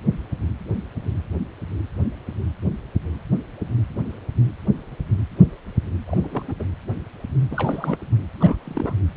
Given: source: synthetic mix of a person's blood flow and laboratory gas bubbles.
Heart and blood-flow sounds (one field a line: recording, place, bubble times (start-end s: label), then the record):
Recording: Doppler ultrasound of blood flow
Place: precordium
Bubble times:
6.07-6.18 s: bubbles
6.21-6.29 s: bubbles
6.32-6.44 s: bubbles
6.48-6.54 s: bubbles
6.59-6.64 s: bubbles
7.50-7.96 s: bubbles
8.40-8.56 s: bubbles
8.64-8.93 s: bubbles
From the record:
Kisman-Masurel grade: 221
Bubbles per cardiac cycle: several, 3 to 8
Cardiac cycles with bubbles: 10 to 50%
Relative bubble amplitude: barely perceptible (0.100 to 0.250)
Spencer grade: 2 (many but less than half of the cardiac periods contain bubble signals, singularly or in groups)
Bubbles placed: anywhere in the cardiac cycle